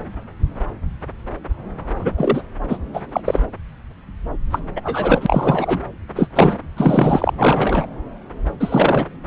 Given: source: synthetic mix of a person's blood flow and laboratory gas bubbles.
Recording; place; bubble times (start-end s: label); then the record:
Doppler ultrasound of blood flow; subclavian vein
1.99-2.13 s: bubbles
2.17-2.42 s: bubbles
2.69-2.78 s: bubbles
2.94-3.00 s: bubbles
3.12-3.21 s: bubbles
3.24-3.40 s: bubbles
4.50-4.60 s: bubbles
4.75-4.81 s: bubbles
4.83-5.82 s: bubbles
6.16-6.28 s: bubbles
6.35-6.57 s: bubbles
6.77-7.31 s: bubbles
7.37-7.87 s: bubbles
8.59-9.07 s: bubbles
From the record:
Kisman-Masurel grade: 233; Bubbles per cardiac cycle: several, 3 to 8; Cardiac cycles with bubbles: 50 to 99%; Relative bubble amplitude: loud (0.450 to 0.775); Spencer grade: 3 (all of the cardiac periods contain showers or single bubble signals, but not dominating or overriding the cardiac motion signals); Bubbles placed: anywhere in the cardiac cycle